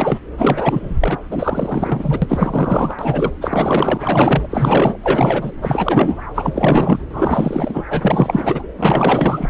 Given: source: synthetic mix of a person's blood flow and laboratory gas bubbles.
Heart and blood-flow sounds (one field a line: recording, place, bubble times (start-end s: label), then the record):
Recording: Doppler ultrasound of blood flow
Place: subclavian vein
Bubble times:
0.00-0.19 s: bubbles
0.38-0.97 s: bubbles
1.00-1.19 s: bubbles
1.31-3.31 s: bubbles
3.41-4.96 s: bubbles
5.03-5.51 s: bubbles
5.62-6.23 s: bubbles
6.34-7.00 s: bubbles
7.09-7.83 s: bubbles
7.90-8.63 s: bubbles
8.77-9.50 s: bubbles
From the record:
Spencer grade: 4 (maximum detectable bubble signal sounding continuously throughout systole and diastole of every cardiac period, and overriding the amplitude of the normal cardiac signals)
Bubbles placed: anywhere in the cardiac cycle